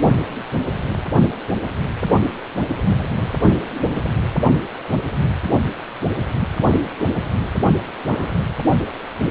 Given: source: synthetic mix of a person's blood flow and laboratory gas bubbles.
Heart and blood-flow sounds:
Doppler ultrasound of blood flow; precordium
8.06-8.34 s: bubbles
From the record:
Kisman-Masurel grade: 112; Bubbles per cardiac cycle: 1 to 2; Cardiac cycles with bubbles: 1 to 10%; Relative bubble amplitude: moderate (0.250 to 0.450); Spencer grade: 1 (occasional bubble signal discernible with the cardiac motion signal, with majority of cardiac periods free of bubbles); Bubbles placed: only in the low amplitude regions of the cardiac cycle

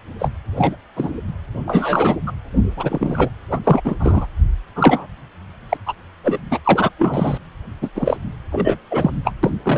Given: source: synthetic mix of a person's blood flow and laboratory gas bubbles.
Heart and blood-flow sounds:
Doppler ultrasound of blood flow; precordium
0.19-0.31 s: bubbles
0.55-0.76 s: bubbles
0.95-1.12 s: bubbles
1.66-2.20 s: bubbles
2.27-2.33 s: bubbles
2.77-3.30 s: bubbles
3.51-3.60 s: bubbles
3.64-3.82 s: bubbles
3.84-3.95 s: bubbles
3.99-4.26 s: bubbles
4.75-5.07 s: bubbles
5.69-5.77 s: bubbles
5.85-5.94 s: bubbles
6.23-6.38 s: bubbles
6.50-6.59 s: bubbles
6.64-6.89 s: bubbles
6.98-7.38 s: bubbles
7.81-7.89 s: bubbles
7.95-8.18 s: bubbles
8.52-8.78 s: bubbles
8.91-9.11 s: bubbles
9.24-9.34 s: bubbles
9.43-9.51 s: bubbles
9.63-9.78 s: bubbles
From the record:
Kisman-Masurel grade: 243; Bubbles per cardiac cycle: several, 3 to 8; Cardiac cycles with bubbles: 100%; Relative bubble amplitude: loud (0.450 to 0.775); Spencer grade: 3 (all of the cardiac periods contain showers or single bubble signals, but not dominating or overriding the cardiac motion signals); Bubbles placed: anywhere in the cardiac cycle

